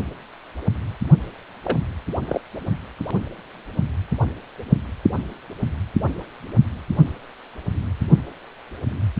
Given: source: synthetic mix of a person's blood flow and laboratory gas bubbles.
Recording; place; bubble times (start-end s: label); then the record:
Doppler ultrasound of blood flow; precordium
1.63-1.79 s: bubbles
2.27-2.40 s: bubbles
From the record:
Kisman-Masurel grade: 122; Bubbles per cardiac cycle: 1 to 2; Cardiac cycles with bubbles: 10 to 50%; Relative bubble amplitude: moderate (0.250 to 0.450); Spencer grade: 2 (many but less than half of the cardiac periods contain bubble signals, singularly or in groups); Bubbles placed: only in the low amplitude regions of the cardiac cycle